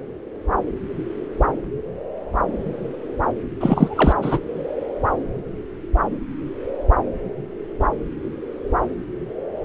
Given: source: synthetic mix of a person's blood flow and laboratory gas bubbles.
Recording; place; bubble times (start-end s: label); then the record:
Doppler ultrasound of blood flow; subclavian vein
3.60-4.13 s: bubbles
4.21-4.39 s: bubbles
From the record:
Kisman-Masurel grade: 213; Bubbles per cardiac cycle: several, 3 to 8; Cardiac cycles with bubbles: 1 to 10%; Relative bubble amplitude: loud (0.450 to 0.775); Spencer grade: 1 (occasional bubble signal discernible with the cardiac motion signal, with majority of cardiac periods free of bubbles); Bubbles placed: anywhere in the cardiac cycle